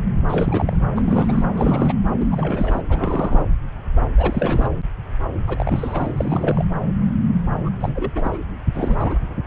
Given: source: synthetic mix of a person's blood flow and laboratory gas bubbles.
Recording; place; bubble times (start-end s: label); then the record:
Doppler ultrasound of blood flow; subclavian vein
0.29-0.76 s: bubbles
0.95-1.45 s: bubbles
1.55-1.96 s: bubbles
2.20-2.28 s: bubbles
2.31-2.82 s: bubbles
2.90-3.44 s: bubbles
4.18-4.69 s: bubbles
5.47-6.15 s: bubbles
6.17-6.65 s: bubbles
7.65-7.71 s: bubbles
7.81-8.12 s: bubbles
8.15-8.38 s: bubbles
8.74-9.18 s: bubbles
From the record:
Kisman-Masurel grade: 332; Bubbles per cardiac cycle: rolling drumbeat, 9 or more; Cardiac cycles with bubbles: 50 to 99%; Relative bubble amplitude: moderate (0.250 to 0.450); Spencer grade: 3 (all of the cardiac periods contain showers or single bubble signals, but not dominating or overriding the cardiac motion signals); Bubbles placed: anywhere in the cardiac cycle